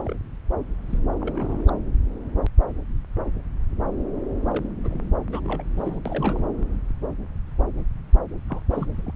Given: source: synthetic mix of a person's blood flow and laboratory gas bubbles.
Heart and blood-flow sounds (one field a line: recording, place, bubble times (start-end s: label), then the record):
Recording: Doppler ultrasound of blood flow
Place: subclavian vein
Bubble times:
0.00-0.14 s: bubbles
0.90-0.99 s: bubbles
1.21-1.71 s: bubbles
4.49-4.70 s: bubbles
4.83-5.10 s: bubbles
5.32-5.40 s: bubbles
5.45-5.64 s: bubbles
5.75-5.99 s: bubbles
6.05-6.38 s: bubbles
8.49-8.61 s: bubbles
8.71-8.86 s: bubbles
8.89-9.12 s: bubbles
From the record:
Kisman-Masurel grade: 221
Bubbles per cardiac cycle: several, 3 to 8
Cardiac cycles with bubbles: 10 to 50%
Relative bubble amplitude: barely perceptible (0.100 to 0.250)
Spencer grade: 2 (many but less than half of the cardiac periods contain bubble signals, singularly or in groups)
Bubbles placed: anywhere in the cardiac cycle